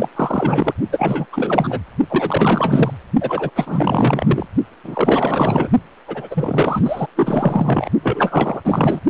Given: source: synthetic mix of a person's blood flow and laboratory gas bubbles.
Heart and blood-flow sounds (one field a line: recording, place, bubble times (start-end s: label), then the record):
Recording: Doppler ultrasound of blood flow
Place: precordium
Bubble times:
0.00-0.09 s: bubbles
0.15-0.73 s: bubbles
0.92-1.26 s: bubbles
1.32-1.82 s: bubbles
2.10-2.92 s: bubbles
3.21-3.50 s: bubbles
3.55-4.46 s: bubbles
4.83-5.69 s: bubbles
6.08-6.28 s: bubbles
6.30-7.07 s: bubbles
7.16-7.90 s: bubbles
8.02-8.61 s: bubbles
8.64-9.00 s: bubbles
From the record:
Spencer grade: 4 (maximum detectable bubble signal sounding continuously throughout systole and diastole of every cardiac period, and overriding the amplitude of the normal cardiac signals)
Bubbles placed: only in the low amplitude regions of the cardiac cycle